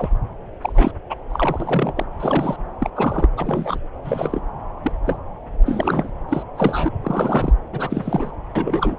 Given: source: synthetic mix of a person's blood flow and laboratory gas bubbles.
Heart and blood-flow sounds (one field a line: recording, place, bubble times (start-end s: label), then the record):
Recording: Doppler ultrasound of blood flow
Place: subclavian vein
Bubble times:
0.00-0.18 s: bubbles
0.61-0.91 s: bubbles
1.09-1.15 s: bubbles
1.29-1.93 s: bubbles
1.96-2.06 s: bubbles
2.19-2.56 s: bubbles
2.79-2.90 s: bubbles
2.95-3.29 s: bubbles
3.37-3.79 s: bubbles
4.04-4.42 s: bubbles
4.83-4.92 s: bubbles
5.05-5.17 s: bubbles
5.62-6.11 s: bubbles
6.29-6.43 s: bubbles
6.57-6.91 s: bubbles
7.02-7.52 s: bubbles
7.72-8.31 s: bubbles
8.55-8.96 s: bubbles
From the record:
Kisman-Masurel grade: 242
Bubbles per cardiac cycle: several, 3 to 8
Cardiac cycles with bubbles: 100%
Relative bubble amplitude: moderate (0.250 to 0.450)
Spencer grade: 3 (all of the cardiac periods contain showers or single bubble signals, but not dominating or overriding the cardiac motion signals)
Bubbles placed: anywhere in the cardiac cycle